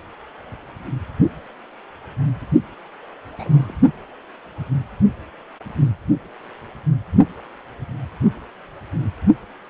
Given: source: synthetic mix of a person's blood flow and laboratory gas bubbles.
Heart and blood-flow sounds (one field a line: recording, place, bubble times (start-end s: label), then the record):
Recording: Doppler ultrasound of blood flow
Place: precordium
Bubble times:
3.38-3.74 s: bubbles
From the record:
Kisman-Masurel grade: 121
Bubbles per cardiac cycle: 1 to 2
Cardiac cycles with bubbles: 10 to 50%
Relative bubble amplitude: barely perceptible (0.100 to 0.250)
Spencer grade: 2 (many but less than half of the cardiac periods contain bubble signals, singularly or in groups)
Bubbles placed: only in the low amplitude regions of the cardiac cycle